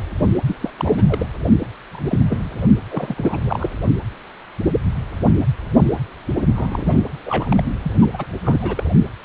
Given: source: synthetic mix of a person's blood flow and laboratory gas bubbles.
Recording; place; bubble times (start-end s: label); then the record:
Doppler ultrasound of blood flow; precordium
0.45-0.55 s: bubbles
0.60-0.70 s: bubbles
0.76-1.04 s: bubbles
1.07-1.26 s: bubbles
1.92-2.19 s: bubbles
2.27-2.51 s: bubbles
2.90-3.69 s: bubbles
6.54-7.02 s: bubbles
7.25-7.63 s: bubbles
7.82-7.93 s: bubbles
8.02-8.06 s: bubbles
8.13-8.25 s: bubbles
8.45-8.83 s: bubbles
From the record:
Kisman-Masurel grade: 232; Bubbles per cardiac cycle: several, 3 to 8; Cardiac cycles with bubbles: 50 to 99%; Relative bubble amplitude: moderate (0.250 to 0.450); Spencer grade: 3 (all of the cardiac periods contain showers or single bubble signals, but not dominating or overriding the cardiac motion signals); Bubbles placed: only in the low amplitude regions of the cardiac cycle